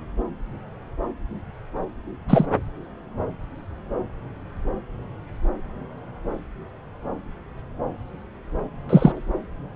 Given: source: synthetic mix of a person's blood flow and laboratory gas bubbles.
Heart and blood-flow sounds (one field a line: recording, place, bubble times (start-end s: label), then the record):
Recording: Doppler ultrasound of blood flow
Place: subclavian vein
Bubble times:
2.28-2.46 s: bubbles
8.89-9.12 s: bubbles
From the record:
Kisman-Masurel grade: 123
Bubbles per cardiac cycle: 1 to 2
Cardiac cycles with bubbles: 10 to 50%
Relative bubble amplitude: loud (0.450 to 0.775)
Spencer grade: 2 (many but less than half of the cardiac periods contain bubble signals, singularly or in groups)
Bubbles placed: anywhere in the cardiac cycle